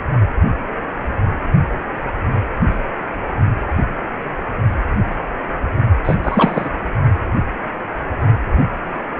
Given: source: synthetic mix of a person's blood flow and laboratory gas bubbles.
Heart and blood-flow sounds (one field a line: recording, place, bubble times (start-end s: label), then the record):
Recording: Doppler ultrasound of blood flow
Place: precordium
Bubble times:
6.04-6.15 s: bubbles
6.23-6.70 s: bubbles
From the record:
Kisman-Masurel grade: 213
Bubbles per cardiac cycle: several, 3 to 8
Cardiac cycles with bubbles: 1 to 10%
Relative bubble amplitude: loud (0.450 to 0.775)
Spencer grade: 1 (occasional bubble signal discernible with the cardiac motion signal, with majority of cardiac periods free of bubbles)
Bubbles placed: only in the low amplitude regions of the cardiac cycle